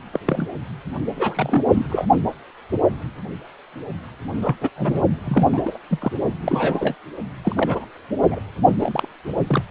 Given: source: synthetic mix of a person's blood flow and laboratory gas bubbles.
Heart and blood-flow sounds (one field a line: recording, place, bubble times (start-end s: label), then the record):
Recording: Doppler ultrasound of blood flow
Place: precordium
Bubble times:
0.13-0.19 s: bubbles
0.26-0.47 s: bubbles
1.13-1.64 s: bubbles
1.71-1.86 s: bubbles
1.89-2.05 s: bubbles
4.42-4.56 s: bubbles
4.61-4.69 s: bubbles
4.76-5.02 s: bubbles
5.25-5.78 s: bubbles
5.90-6.12 s: bubbles
6.44-6.95 s: bubbles
7.44-7.85 s: bubbles
8.28-8.39 s: bubbles
8.79-9.08 s: bubbles
9.47-9.62 s: bubbles
From the record:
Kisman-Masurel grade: 232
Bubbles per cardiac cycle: several, 3 to 8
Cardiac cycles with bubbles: 50 to 99%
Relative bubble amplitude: moderate (0.250 to 0.450)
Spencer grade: 3 (all of the cardiac periods contain showers or single bubble signals, but not dominating or overriding the cardiac motion signals)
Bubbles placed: only in the low amplitude regions of the cardiac cycle